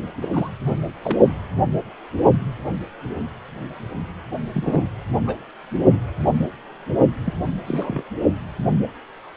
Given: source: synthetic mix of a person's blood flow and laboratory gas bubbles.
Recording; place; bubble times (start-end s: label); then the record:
Doppler ultrasound of blood flow; precordium
0.22-0.28 s: bubbles
0.33-0.50 s: bubbles
0.65-0.77 s: bubbles
1.03-1.17 s: bubbles
4.53-4.88 s: bubbles
5.27-5.42 s: bubbles
7.25-7.33 s: bubbles
7.67-8.03 s: bubbles
From the record:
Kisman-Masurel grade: 222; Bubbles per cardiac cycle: several, 3 to 8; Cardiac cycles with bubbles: 10 to 50%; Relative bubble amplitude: moderate (0.250 to 0.450); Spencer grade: 2 (many but less than half of the cardiac periods contain bubble signals, singularly or in groups); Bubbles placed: only in the low amplitude regions of the cardiac cycle